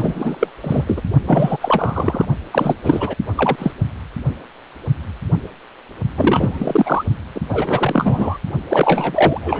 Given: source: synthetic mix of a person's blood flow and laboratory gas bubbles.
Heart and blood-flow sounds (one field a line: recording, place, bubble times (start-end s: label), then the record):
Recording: Doppler ultrasound of blood flow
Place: precordium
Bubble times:
0.00-0.51 s: bubbles
0.60-0.84 s: bubbles
0.86-1.01 s: bubbles
1.26-1.57 s: bubbles
1.60-2.25 s: bubbles
2.51-2.74 s: bubbles
2.84-3.15 s: bubbles
3.37-3.71 s: bubbles
6.17-7.03 s: bubbles
7.34-7.41 s: bubbles
7.49-8.38 s: bubbles
8.69-9.60 s: bubbles
From the record:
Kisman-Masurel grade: 333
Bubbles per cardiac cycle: rolling drumbeat, 9 or more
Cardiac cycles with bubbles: 50 to 99%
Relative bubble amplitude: loud (0.450 to 0.775)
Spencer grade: 3 (all of the cardiac periods contain showers or single bubble signals, but not dominating or overriding the cardiac motion signals)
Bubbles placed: only in the low amplitude regions of the cardiac cycle